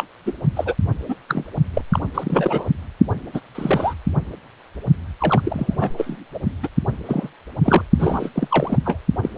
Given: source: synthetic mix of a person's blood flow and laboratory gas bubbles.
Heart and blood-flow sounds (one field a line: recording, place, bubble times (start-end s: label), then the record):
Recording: Doppler ultrasound of blood flow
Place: precordium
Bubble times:
0.00-0.04 s: bubbles
0.26-0.33 s: bubbles
0.55-0.74 s: bubbles
1.09-1.16 s: bubbles
1.28-1.45 s: bubbles
1.74-1.82 s: bubbles
1.92-1.99 s: bubbles
2.14-2.67 s: bubbles
3.33-3.40 s: bubbles
3.54-3.95 s: bubbles
5.18-5.91 s: bubbles
5.97-6.17 s: bubbles
6.34-6.39 s: bubbles
6.62-6.68 s: bubbles
7.05-7.29 s: bubbles
7.62-7.82 s: bubbles
7.99-8.29 s: bubbles
8.35-8.79 s: bubbles
8.85-8.97 s: bubbles
9.23-9.29 s: bubbles
From the record:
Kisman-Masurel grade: 242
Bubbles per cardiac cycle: several, 3 to 8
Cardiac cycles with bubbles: 100%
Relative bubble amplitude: moderate (0.250 to 0.450)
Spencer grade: 3 (all of the cardiac periods contain showers or single bubble signals, but not dominating or overriding the cardiac motion signals)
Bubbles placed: only in the low amplitude regions of the cardiac cycle